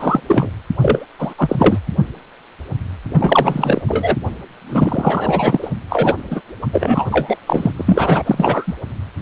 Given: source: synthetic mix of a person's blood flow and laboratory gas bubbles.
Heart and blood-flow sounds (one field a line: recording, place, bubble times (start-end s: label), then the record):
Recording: Doppler ultrasound of blood flow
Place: precordium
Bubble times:
0.00-0.20 s: bubbles
0.28-0.51 s: bubbles
0.80-1.06 s: bubbles
1.19-1.35 s: bubbles
1.38-1.79 s: bubbles
3.10-3.82 s: bubbles
3.88-4.17 s: bubbles
4.69-5.71 s: bubbles
5.89-6.14 s: bubbles
6.30-6.41 s: bubbles
6.62-6.67 s: bubbles
6.72-7.05 s: bubbles
7.10-7.38 s: bubbles
7.46-7.71 s: bubbles
7.76-8.74 s: bubbles
From the record:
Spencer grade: 3 (all of the cardiac periods contain showers or single bubble signals, but not dominating or overriding the cardiac motion signals)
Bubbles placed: anywhere in the cardiac cycle